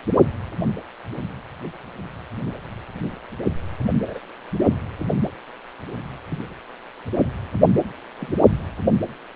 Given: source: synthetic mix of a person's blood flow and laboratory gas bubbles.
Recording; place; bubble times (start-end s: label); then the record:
Doppler ultrasound of blood flow; precordium
3.89-3.93 s: bubbles
3.95-4.02 s: bubbles
4.07-4.19 s: bubbles
6.27-6.47 s: bubbles
8.21-8.31 s: bubbles
From the record:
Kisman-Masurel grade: 121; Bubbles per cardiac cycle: 1 to 2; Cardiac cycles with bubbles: 10 to 50%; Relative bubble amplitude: barely perceptible (0.100 to 0.250); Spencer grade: 2 (many but less than half of the cardiac periods contain bubble signals, singularly or in groups); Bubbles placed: only in the low amplitude regions of the cardiac cycle